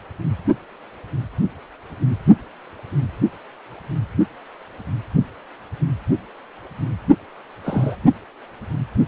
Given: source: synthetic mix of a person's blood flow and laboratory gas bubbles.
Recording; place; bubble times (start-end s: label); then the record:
Doppler ultrasound of blood flow; precordium
7.65-7.95 s: bubbles
From the record:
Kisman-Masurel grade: 113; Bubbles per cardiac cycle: 1 to 2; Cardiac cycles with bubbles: 1 to 10%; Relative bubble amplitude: loud (0.450 to 0.775); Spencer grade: 1 (occasional bubble signal discernible with the cardiac motion signal, with majority of cardiac periods free of bubbles); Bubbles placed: only in the low amplitude regions of the cardiac cycle